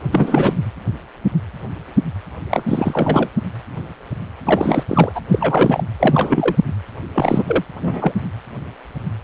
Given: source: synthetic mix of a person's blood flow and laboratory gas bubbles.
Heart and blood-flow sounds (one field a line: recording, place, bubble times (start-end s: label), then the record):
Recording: Doppler ultrasound of blood flow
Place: precordium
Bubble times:
0.11-0.64 s: bubbles
2.50-2.62 s: bubbles
2.67-3.29 s: bubbles
4.45-4.83 s: bubbles
4.88-5.12 s: bubbles
5.15-5.21 s: bubbles
5.31-5.83 s: bubbles
6.00-6.55 s: bubbles
7.14-7.43 s: bubbles
7.46-7.65 s: bubbles
7.81-8.12 s: bubbles
From the record:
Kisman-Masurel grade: 333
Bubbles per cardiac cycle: rolling drumbeat, 9 or more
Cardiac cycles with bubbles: 50 to 99%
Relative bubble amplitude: loud (0.450 to 0.775)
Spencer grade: 3 (all of the cardiac periods contain showers or single bubble signals, but not dominating or overriding the cardiac motion signals)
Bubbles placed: anywhere in the cardiac cycle